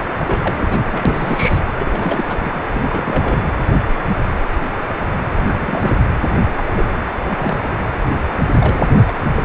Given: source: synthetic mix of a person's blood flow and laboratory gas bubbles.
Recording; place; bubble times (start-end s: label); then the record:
Doppler ultrasound of blood flow; precordium
0.18-0.85 s: bubbles
0.92-1.63 s: bubbles
1.79-2.25 s: bubbles
2.29-2.62 s: bubbles
2.71-3.42 s: bubbles
5.39-5.95 s: bubbles
6.57-6.64 s: bubbles
6.76-6.92 s: bubbles
7.04-7.12 s: bubbles
7.31-7.57 s: bubbles
7.71-7.77 s: bubbles
8.58-9.13 s: bubbles
9.34-9.45 s: bubbles
From the record:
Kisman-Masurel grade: 332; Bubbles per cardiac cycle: rolling drumbeat, 9 or more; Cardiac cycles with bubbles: 50 to 99%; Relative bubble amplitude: moderate (0.250 to 0.450); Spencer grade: 3 (all of the cardiac periods contain showers or single bubble signals, but not dominating or overriding the cardiac motion signals); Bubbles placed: anywhere in the cardiac cycle